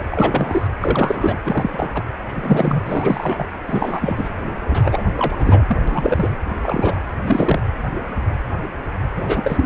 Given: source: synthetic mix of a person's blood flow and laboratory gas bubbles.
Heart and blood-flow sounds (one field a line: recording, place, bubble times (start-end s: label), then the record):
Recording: Doppler ultrasound of blood flow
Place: precordium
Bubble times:
0.00-0.04 s: bubbles
0.11-0.67 s: bubbles
0.81-1.39 s: bubbles
1.45-1.91 s: bubbles
1.94-2.03 s: bubbles
2.27-2.81 s: bubbles
2.85-3.46 s: bubbles
3.67-4.34 s: bubbles
4.68-5.06 s: bubbles
5.16-5.36 s: bubbles
5.38-5.65 s: bubbles
5.67-5.78 s: bubbles
5.88-6.29 s: bubbles
6.62-6.98 s: bubbles
7.26-7.59 s: bubbles
9.15-9.66 s: bubbles
From the record:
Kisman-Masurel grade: 332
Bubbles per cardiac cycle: rolling drumbeat, 9 or more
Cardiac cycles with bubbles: 50 to 99%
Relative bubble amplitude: moderate (0.250 to 0.450)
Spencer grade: 3 (all of the cardiac periods contain showers or single bubble signals, but not dominating or overriding the cardiac motion signals)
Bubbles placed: anywhere in the cardiac cycle